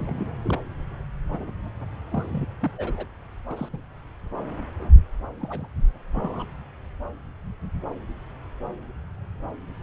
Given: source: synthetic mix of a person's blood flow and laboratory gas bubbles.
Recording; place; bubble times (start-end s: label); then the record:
Doppler ultrasound of blood flow; subclavian vein
0.00-0.30 s: bubbles
0.42-0.59 s: bubbles
1.28-1.51 s: bubbles
2.11-2.46 s: bubbles
2.61-2.71 s: bubbles
2.77-3.06 s: bubbles
3.50-3.69 s: bubbles
3.73-3.81 s: bubbles
5.40-5.67 s: bubbles
6.15-6.47 s: bubbles
From the record:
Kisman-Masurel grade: 221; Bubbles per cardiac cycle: several, 3 to 8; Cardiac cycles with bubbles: 10 to 50%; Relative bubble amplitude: barely perceptible (0.100 to 0.250); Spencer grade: 2 (many but less than half of the cardiac periods contain bubble signals, singularly or in groups); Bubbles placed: anywhere in the cardiac cycle